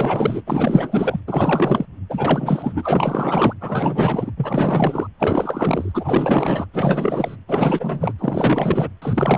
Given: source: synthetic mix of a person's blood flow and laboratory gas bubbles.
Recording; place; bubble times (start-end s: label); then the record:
Doppler ultrasound of blood flow; precordium
0.00-0.43 s: bubbles
0.46-1.20 s: bubbles
1.27-1.85 s: bubbles
2.10-3.54 s: bubbles
3.60-4.32 s: bubbles
4.37-5.08 s: bubbles
5.19-6.66 s: bubbles
6.73-7.37 s: bubbles
7.47-8.13 s: bubbles
8.19-8.89 s: bubbles
9.02-9.38 s: bubbles
From the record:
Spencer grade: 4 (maximum detectable bubble signal sounding continuously throughout systole and diastole of every cardiac period, and overriding the amplitude of the normal cardiac signals); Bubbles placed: anywhere in the cardiac cycle